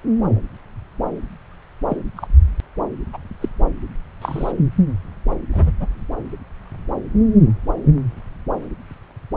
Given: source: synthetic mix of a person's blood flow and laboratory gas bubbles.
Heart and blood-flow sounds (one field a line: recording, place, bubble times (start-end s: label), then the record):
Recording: Doppler ultrasound of blood flow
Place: subclavian vein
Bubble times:
1.88-1.97 s: bubbles
2.16-2.27 s: bubbles
3.13-3.18 s: bubbles
3.40-3.48 s: bubbles
4.21-4.52 s: bubbles
5.52-5.71 s: bubbles
5.79-5.87 s: bubbles
From the record:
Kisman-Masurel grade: 122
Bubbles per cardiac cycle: 1 to 2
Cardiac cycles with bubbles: 10 to 50%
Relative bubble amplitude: moderate (0.250 to 0.450)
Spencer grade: 2 (many but less than half of the cardiac periods contain bubble signals, singularly or in groups)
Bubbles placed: anywhere in the cardiac cycle